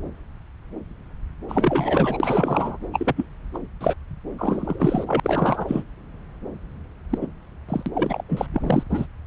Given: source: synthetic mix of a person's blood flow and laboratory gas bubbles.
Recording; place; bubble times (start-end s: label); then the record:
Doppler ultrasound of blood flow; subclavian vein
1.48-2.18 s: bubbles
2.20-2.77 s: bubbles
2.93-3.14 s: bubbles
3.17-3.26 s: bubbles
3.54-3.58 s: bubbles
3.80-3.94 s: bubbles
4.38-5.04 s: bubbles
5.07-5.20 s: bubbles
5.24-5.83 s: bubbles
7.10-7.19 s: bubbles
7.21-7.27 s: bubbles
7.69-7.83 s: bubbles
7.86-7.89 s: bubbles
7.95-8.22 s: bubbles
8.29-8.46 s: bubbles
8.54-8.84 s: bubbles
8.89-9.06 s: bubbles
From the record:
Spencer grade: 3 (all of the cardiac periods contain showers or single bubble signals, but not dominating or overriding the cardiac motion signals); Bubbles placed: anywhere in the cardiac cycle